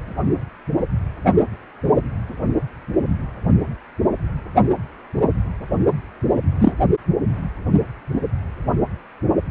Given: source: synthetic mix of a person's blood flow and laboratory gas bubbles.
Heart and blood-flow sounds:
Doppler ultrasound of blood flow; precordium
6.60-6.75 s: bubbles
From the record:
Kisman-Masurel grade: 113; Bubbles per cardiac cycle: 1 to 2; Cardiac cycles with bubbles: 1 to 10%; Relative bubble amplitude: loud (0.450 to 0.775); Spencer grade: 1 (occasional bubble signal discernible with the cardiac motion signal, with majority of cardiac periods free of bubbles); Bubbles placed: anywhere in the cardiac cycle

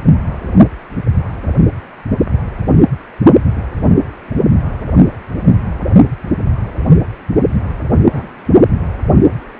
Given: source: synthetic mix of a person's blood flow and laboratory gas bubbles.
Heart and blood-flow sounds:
Doppler ultrasound of blood flow; precordium
8.03-8.06 s: bubbles
8.09-8.29 s: bubbles
8.32-8.38 s: bubbles
From the record:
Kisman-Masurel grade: 112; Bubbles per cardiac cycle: 1 to 2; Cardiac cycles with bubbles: 1 to 10%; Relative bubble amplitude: moderate (0.250 to 0.450); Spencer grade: 1 (occasional bubble signal discernible with the cardiac motion signal, with majority of cardiac periods free of bubbles); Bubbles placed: only in the low amplitude regions of the cardiac cycle

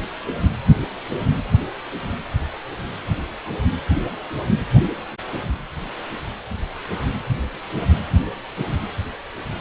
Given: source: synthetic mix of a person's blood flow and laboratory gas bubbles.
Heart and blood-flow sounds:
Doppler ultrasound of blood flow; precordium
no bubbles
From the record:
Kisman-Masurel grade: 000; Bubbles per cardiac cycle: 0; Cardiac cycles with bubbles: 0%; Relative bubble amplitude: no bubbles discernible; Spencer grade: 0 (complete lack of bubble signals)

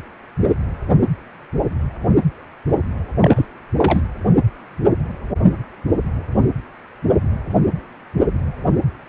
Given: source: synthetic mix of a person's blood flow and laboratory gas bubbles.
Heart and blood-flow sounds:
Doppler ultrasound of blood flow; precordium
3.20-3.48 s: bubbles
3.77-4.01 s: bubbles
From the record:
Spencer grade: 1 (occasional bubble signal discernible with the cardiac motion signal, with majority of cardiac periods free of bubbles); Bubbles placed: anywhere in the cardiac cycle

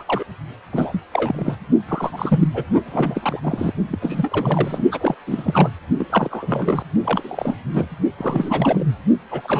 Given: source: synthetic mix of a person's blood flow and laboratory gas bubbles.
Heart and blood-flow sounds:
Doppler ultrasound of blood flow; precordium
0.00-0.03 s: bubbles
0.07-0.24 s: bubbles
0.72-1.01 s: bubbles
1.11-1.56 s: bubbles
1.88-2.48 s: bubbles
2.54-2.63 s: bubbles
2.86-3.40 s: bubbles
3.42-3.73 s: bubbles
3.89-3.98 s: bubbles
4.01-4.83 s: bubbles
4.91-5.15 s: bubbles
5.27-5.70 s: bubbles
5.99-6.06 s: bubbles
6.10-6.83 s: bubbles
7.04-7.56 s: bubbles
7.74-7.85 s: bubbles
8.18-8.85 s: bubbles
9.30-9.60 s: bubbles
From the record:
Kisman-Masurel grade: 342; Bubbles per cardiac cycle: rolling drumbeat, 9 or more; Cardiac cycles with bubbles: 100%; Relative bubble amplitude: moderate (0.250 to 0.450); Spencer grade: 3 (all of the cardiac periods contain showers or single bubble signals, but not dominating or overriding the cardiac motion signals); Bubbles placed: only in the low amplitude regions of the cardiac cycle

